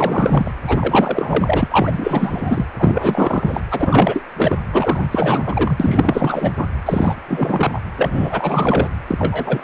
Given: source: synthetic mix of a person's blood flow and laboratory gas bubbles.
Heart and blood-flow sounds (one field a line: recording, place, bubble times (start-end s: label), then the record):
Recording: Doppler ultrasound of blood flow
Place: precordium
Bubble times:
0.00-0.54 s: bubbles
0.68-2.66 s: bubbles
2.78-3.62 s: bubbles
3.71-4.22 s: bubbles
4.36-4.57 s: bubbles
4.73-5.08 s: bubbles
5.11-5.77 s: bubbles
5.79-6.52 s: bubbles
6.56-6.67 s: bubbles
6.86-7.17 s: bubbles
7.28-7.80 s: bubbles
7.96-8.89 s: bubbles
9.07-9.64 s: bubbles
From the record:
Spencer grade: 4 (maximum detectable bubble signal sounding continuously throughout systole and diastole of every cardiac period, and overriding the amplitude of the normal cardiac signals)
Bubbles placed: anywhere in the cardiac cycle